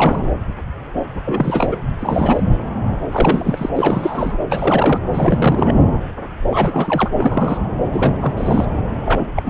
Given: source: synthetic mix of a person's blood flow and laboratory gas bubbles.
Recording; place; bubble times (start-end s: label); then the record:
Doppler ultrasound of blood flow; subclavian vein
0.00-0.30 s: bubbles
1.25-1.81 s: bubbles
2.00-2.43 s: bubbles
3.11-3.69 s: bubbles
3.75-4.38 s: bubbles
4.48-5.00 s: bubbles
5.13-5.75 s: bubbles
6.50-7.10 s: bubbles
7.13-7.62 s: bubbles
7.91-8.66 s: bubbles
9.05-9.26 s: bubbles
9.36-9.50 s: bubbles
From the record:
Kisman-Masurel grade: 333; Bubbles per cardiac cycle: rolling drumbeat, 9 or more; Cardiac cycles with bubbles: 50 to 99%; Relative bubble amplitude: loud (0.450 to 0.775); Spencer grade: 3 (all of the cardiac periods contain showers or single bubble signals, but not dominating or overriding the cardiac motion signals); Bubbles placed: anywhere in the cardiac cycle